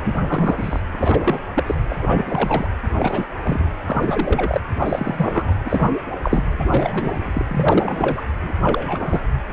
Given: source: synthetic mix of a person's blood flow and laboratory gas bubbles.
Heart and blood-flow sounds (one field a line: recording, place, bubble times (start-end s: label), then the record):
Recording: Doppler ultrasound of blood flow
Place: precordium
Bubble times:
0.04-0.80 s: bubbles
0.91-1.40 s: bubbles
1.54-1.64 s: bubbles
1.66-1.75 s: bubbles
1.90-2.67 s: bubbles
3.00-3.25 s: bubbles
3.43-3.71 s: bubbles
3.86-4.61 s: bubbles
4.79-5.56 s: bubbles
5.65-5.97 s: bubbles
6.23-6.44 s: bubbles
6.58-7.43 s: bubbles
7.49-8.21 s: bubbles
8.42-8.53 s: bubbles
8.63-9.20 s: bubbles
From the record:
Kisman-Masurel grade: 342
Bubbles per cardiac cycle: rolling drumbeat, 9 or more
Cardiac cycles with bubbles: 100%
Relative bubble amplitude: moderate (0.250 to 0.450)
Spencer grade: 3 (all of the cardiac periods contain showers or single bubble signals, but not dominating or overriding the cardiac motion signals)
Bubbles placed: anywhere in the cardiac cycle